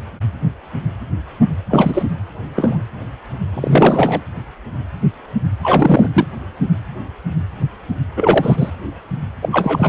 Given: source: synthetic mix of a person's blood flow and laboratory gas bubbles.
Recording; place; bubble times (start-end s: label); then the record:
Doppler ultrasound of blood flow; precordium
1.70-2.03 s: bubbles
2.55-2.84 s: bubbles
3.53-4.21 s: bubbles
5.62-6.08 s: bubbles
6.14-6.27 s: bubbles
8.16-8.71 s: bubbles
9.42-9.49 s: bubbles
9.52-9.89 s: bubbles
From the record:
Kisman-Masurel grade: 223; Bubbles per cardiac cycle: several, 3 to 8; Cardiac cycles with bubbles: 10 to 50%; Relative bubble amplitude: loud (0.450 to 0.775); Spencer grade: 2 (many but less than half of the cardiac periods contain bubble signals, singularly or in groups); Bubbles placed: anywhere in the cardiac cycle